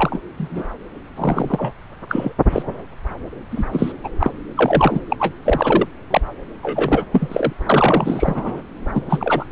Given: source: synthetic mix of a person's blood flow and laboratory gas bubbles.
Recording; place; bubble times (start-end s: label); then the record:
Doppler ultrasound of blood flow; subclavian vein
0.00-0.19 s: bubbles
0.38-0.66 s: bubbles
1.16-1.74 s: bubbles
2.09-2.33 s: bubbles
2.52-2.62 s: bubbles
3.52-3.65 s: bubbles
3.73-3.92 s: bubbles
4.04-4.08 s: bubbles
4.20-4.31 s: bubbles
4.57-5.01 s: bubbles
5.10-5.17 s: bubbles
5.20-5.33 s: bubbles
5.45-5.87 s: bubbles
6.10-6.21 s: bubbles
6.62-7.05 s: bubbles
7.12-7.53 s: bubbles
7.66-8.63 s: bubbles
8.94-9.46 s: bubbles
From the record:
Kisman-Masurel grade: 243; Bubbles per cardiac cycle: several, 3 to 8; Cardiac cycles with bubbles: 100%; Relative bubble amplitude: loud (0.450 to 0.775); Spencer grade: 3 (all of the cardiac periods contain showers or single bubble signals, but not dominating or overriding the cardiac motion signals); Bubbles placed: anywhere in the cardiac cycle